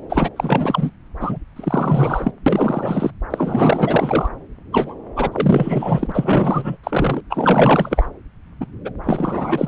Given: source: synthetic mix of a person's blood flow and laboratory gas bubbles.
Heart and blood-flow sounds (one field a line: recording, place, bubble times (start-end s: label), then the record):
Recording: Doppler ultrasound of blood flow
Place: subclavian vein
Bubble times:
0.09-0.29 s: bubbles
0.36-0.91 s: bubbles
1.20-1.39 s: bubbles
1.56-2.32 s: bubbles
2.46-3.10 s: bubbles
3.30-4.29 s: bubbles
4.72-4.94 s: bubbles
5.15-6.76 s: bubbles
6.83-7.21 s: bubbles
7.30-8.09 s: bubbles
8.61-8.67 s: bubbles
8.85-8.91 s: bubbles
9.04-9.68 s: bubbles
From the record:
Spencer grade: 4 (maximum detectable bubble signal sounding continuously throughout systole and diastole of every cardiac period, and overriding the amplitude of the normal cardiac signals)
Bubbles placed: anywhere in the cardiac cycle